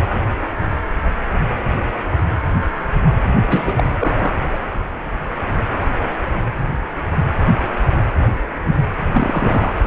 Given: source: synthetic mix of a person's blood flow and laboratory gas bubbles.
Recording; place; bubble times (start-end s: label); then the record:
Doppler ultrasound of blood flow; precordium
3.48-4.33 s: bubbles
4.53-4.60 s: bubbles
9.13-9.72 s: bubbles
From the record:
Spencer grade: 2 (many but less than half of the cardiac periods contain bubble signals, singularly or in groups); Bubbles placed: anywhere in the cardiac cycle